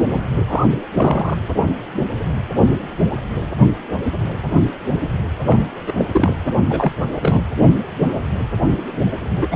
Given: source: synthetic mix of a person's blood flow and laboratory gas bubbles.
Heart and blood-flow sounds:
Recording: Doppler ultrasound of blood flow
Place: precordium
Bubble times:
0.00-0.03 s: bubbles
0.09-0.21 s: bubbles
0.47-0.66 s: bubbles
0.93-1.38 s: bubbles
5.46-5.67 s: bubbles
5.87-5.93 s: bubbles
5.98-6.06 s: bubbles
6.12-6.36 s: bubbles
6.69-6.92 s: bubbles
7.21-7.41 s: bubbles
9.40-9.48 s: bubbles
9.51-9.56 s: bubbles
From the record:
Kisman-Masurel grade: 233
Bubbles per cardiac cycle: several, 3 to 8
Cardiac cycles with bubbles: 50 to 99%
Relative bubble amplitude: loud (0.450 to 0.775)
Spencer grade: 3 (all of the cardiac periods contain showers or single bubble signals, but not dominating or overriding the cardiac motion signals)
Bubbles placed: anywhere in the cardiac cycle

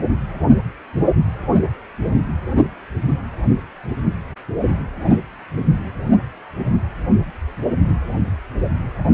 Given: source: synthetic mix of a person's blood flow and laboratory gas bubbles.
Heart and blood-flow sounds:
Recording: Doppler ultrasound of blood flow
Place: precordium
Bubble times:
no bubbles
From the record:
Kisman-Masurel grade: 000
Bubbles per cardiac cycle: 0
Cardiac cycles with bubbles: 0%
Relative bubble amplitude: no bubbles discernible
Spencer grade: 0 (complete lack of bubble signals)

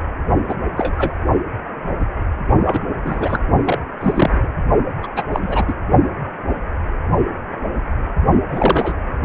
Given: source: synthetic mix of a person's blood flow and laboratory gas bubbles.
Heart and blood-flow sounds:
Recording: Doppler ultrasound of blood flow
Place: precordium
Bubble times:
0.48-0.55 s: bubbles
0.76-1.20 s: bubbles
2.64-2.79 s: bubbles
3.04-3.39 s: bubbles
3.64-3.78 s: bubbles
4.00-4.38 s: bubbles
4.43-4.48 s: bubbles
5.02-5.07 s: bubbles
5.16-5.23 s: bubbles
5.32-5.73 s: bubbles
8.49-8.94 s: bubbles
From the record:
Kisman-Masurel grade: 233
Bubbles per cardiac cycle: several, 3 to 8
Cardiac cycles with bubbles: 50 to 99%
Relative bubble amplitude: loud (0.450 to 0.775)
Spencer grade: 3 (all of the cardiac periods contain showers or single bubble signals, but not dominating or overriding the cardiac motion signals)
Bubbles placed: only in the low amplitude regions of the cardiac cycle

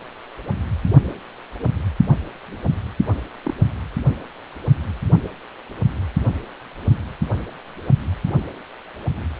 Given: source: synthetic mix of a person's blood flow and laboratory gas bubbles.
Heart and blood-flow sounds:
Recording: Doppler ultrasound of blood flow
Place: precordium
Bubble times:
3.45-3.54 s: bubbles
From the record:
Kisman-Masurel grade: 111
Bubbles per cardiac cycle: 1 to 2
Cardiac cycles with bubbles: 1 to 10%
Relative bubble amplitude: barely perceptible (0.100 to 0.250)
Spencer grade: 1 (occasional bubble signal discernible with the cardiac motion signal, with majority of cardiac periods free of bubbles)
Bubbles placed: only in the low amplitude regions of the cardiac cycle

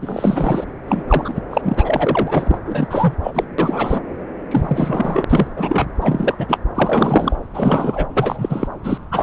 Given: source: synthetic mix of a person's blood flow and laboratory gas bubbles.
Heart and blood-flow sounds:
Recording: Doppler ultrasound of blood flow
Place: subclavian vein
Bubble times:
0.02-0.66 s: bubbles
0.88-1.03 s: bubbles
1.07-1.41 s: bubbles
1.50-2.58 s: bubbles
2.65-3.15 s: bubbles
3.23-3.31 s: bubbles
3.34-3.44 s: bubbles
3.58-4.00 s: bubbles
4.51-5.25 s: bubbles
5.29-5.47 s: bubbles
5.57-5.87 s: bubbles
6.00-6.58 s: bubbles
6.75-7.36 s: bubbles
7.54-8.06 s: bubbles
8.14-8.68 s: bubbles
8.84-8.98 s: bubbles
9.11-9.23 s: bubbles
From the record:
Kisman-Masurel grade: 343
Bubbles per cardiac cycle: rolling drumbeat, 9 or more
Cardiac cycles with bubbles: 100%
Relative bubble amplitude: loud (0.450 to 0.775)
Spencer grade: 3 (all of the cardiac periods contain showers or single bubble signals, but not dominating or overriding the cardiac motion signals)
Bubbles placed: anywhere in the cardiac cycle

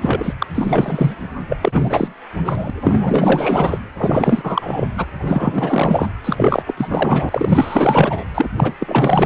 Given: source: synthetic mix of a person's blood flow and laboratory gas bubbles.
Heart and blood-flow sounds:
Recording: Doppler ultrasound of blood flow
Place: precordium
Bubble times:
0.01-0.34 s: bubbles
0.39-0.47 s: bubbles
0.54-1.15 s: bubbles
1.49-1.57 s: bubbles
1.61-2.13 s: bubbles
2.45-2.70 s: bubbles
2.81-3.81 s: bubbles
3.97-4.88 s: bubbles
4.97-5.06 s: bubbles
5.17-6.12 s: bubbles
6.24-6.62 s: bubbles
6.67-6.74 s: bubbles
6.77-8.24 s: bubbles
8.34-8.49 s: bubbles
8.56-8.72 s: bubbles
8.80-9.25 s: bubbles
From the record:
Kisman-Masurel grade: 444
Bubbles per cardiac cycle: continuous sound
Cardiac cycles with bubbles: 100%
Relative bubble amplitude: maximal (0.775 to 0.999)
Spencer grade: 4 (maximum detectable bubble signal sounding continuously throughout systole and diastole of every cardiac period, and overriding the amplitude of the normal cardiac signals)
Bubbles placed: anywhere in the cardiac cycle

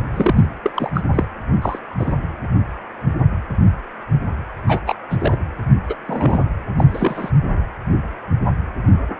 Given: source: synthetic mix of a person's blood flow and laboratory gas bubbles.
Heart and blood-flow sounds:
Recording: Doppler ultrasound of blood flow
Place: precordium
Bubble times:
0.14-0.45 s: bubbles
0.63-0.70 s: bubbles
0.74-0.91 s: bubbles
0.94-1.02 s: bubbles
1.13-1.25 s: bubbles
1.62-1.79 s: bubbles
1.99-2.14 s: bubbles
4.67-4.81 s: bubbles
4.86-4.95 s: bubbles
5.09-5.37 s: bubbles
5.88-5.96 s: bubbles
6.07-6.45 s: bubbles
6.78-7.30 s: bubbles
From the record:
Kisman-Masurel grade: 232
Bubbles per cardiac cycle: several, 3 to 8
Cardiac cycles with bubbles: 50 to 99%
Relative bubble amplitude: moderate (0.250 to 0.450)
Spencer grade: 3 (all of the cardiac periods contain showers or single bubble signals, but not dominating or overriding the cardiac motion signals)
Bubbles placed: anywhere in the cardiac cycle

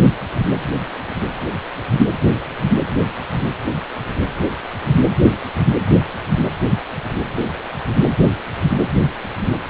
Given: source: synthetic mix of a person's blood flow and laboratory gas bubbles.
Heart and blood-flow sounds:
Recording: Doppler ultrasound of blood flow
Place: precordium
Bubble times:
no bubbles
From the record:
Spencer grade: 0 (complete lack of bubble signals)

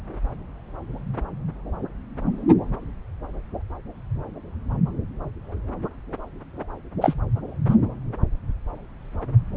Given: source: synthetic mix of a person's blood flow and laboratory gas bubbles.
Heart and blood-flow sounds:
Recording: Doppler ultrasound of blood flow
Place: subclavian vein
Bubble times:
7.01-7.14 s: bubbles
7.68-7.75 s: bubbles
From the record:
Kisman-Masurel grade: 122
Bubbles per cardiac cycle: 1 to 2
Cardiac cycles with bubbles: 10 to 50%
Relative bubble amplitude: moderate (0.250 to 0.450)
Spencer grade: 2 (many but less than half of the cardiac periods contain bubble signals, singularly or in groups)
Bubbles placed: anywhere in the cardiac cycle

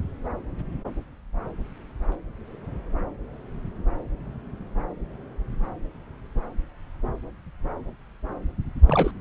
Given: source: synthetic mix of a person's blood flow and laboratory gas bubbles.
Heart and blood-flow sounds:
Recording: Doppler ultrasound of blood flow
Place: subclavian vein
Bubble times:
8.86-9.11 s: bubbles
From the record:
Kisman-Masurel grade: 212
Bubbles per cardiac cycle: several, 3 to 8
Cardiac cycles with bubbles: 1 to 10%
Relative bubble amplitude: moderate (0.250 to 0.450)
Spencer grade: 1 (occasional bubble signal discernible with the cardiac motion signal, with majority of cardiac periods free of bubbles)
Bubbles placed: anywhere in the cardiac cycle

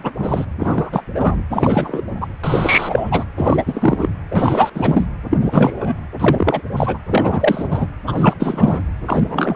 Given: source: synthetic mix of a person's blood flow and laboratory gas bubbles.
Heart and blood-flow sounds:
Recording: Doppler ultrasound of blood flow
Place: precordium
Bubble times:
0.03-0.12 s: bubbles
0.18-0.45 s: bubbles
0.59-1.01 s: bubbles
1.14-1.43 s: bubbles
1.51-2.03 s: bubbles
2.21-2.27 s: bubbles
2.44-3.24 s: bubbles
3.37-4.09 s: bubbles
4.31-4.70 s: bubbles
4.74-5.07 s: bubbles
5.29-5.38 s: bubbles
5.41-6.01 s: bubbles
6.19-6.62 s: bubbles
6.71-6.97 s: bubbles
7.09-7.88 s: bubbles
8.06-8.37 s: bubbles
8.39-8.82 s: bubbles
9.06-9.56 s: bubbles
From the record:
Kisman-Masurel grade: 343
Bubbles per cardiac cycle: rolling drumbeat, 9 or more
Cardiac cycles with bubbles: 100%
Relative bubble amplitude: loud (0.450 to 0.775)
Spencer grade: 3 (all of the cardiac periods contain showers or single bubble signals, but not dominating or overriding the cardiac motion signals)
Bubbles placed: anywhere in the cardiac cycle

